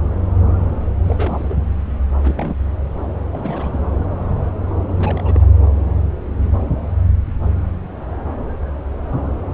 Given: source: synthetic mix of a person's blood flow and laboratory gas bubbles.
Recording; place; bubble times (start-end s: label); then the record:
Doppler ultrasound of blood flow; subclavian vein
1.04-1.57 s: bubbles
2.21-2.56 s: bubbles
3.32-3.78 s: bubbles
4.99-5.45 s: bubbles
From the record:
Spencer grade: 2 (many but less than half of the cardiac periods contain bubble signals, singularly or in groups); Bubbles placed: anywhere in the cardiac cycle